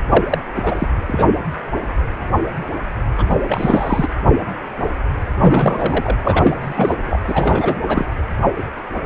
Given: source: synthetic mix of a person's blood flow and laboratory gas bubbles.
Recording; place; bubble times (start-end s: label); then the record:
Doppler ultrasound of blood flow; precordium
0.09-0.24 s: bubbles
0.30-0.38 s: bubbles
0.55-0.62 s: bubbles
0.66-0.88 s: bubbles
1.07-1.26 s: bubbles
3.17-3.38 s: bubbles
3.43-4.08 s: bubbles
5.41-6.16 s: bubbles
6.24-6.58 s: bubbles
6.61-6.98 s: bubbles
7.06-7.20 s: bubbles
7.28-7.75 s: bubbles
7.88-8.05 s: bubbles
From the record:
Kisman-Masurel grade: 333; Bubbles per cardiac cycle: rolling drumbeat, 9 or more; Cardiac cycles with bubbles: 50 to 99%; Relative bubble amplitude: loud (0.450 to 0.775); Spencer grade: 3 (all of the cardiac periods contain showers or single bubble signals, but not dominating or overriding the cardiac motion signals); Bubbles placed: anywhere in the cardiac cycle